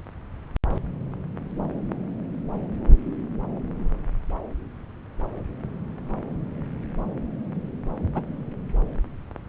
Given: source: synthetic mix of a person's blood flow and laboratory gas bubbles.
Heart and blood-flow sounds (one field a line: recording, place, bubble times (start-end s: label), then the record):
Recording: Doppler ultrasound of blood flow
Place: subclavian vein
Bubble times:
8.14-8.21 s: bubbles
From the record:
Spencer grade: 2 (many but less than half of the cardiac periods contain bubble signals, singularly or in groups)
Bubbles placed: anywhere in the cardiac cycle